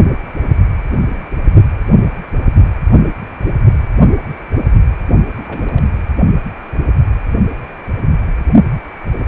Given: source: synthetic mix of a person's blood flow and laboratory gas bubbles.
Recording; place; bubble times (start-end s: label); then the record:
Doppler ultrasound of blood flow; precordium
5.30-5.87 s: bubbles
From the record:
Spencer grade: 1 (occasional bubble signal discernible with the cardiac motion signal, with majority of cardiac periods free of bubbles); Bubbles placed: only in the low amplitude regions of the cardiac cycle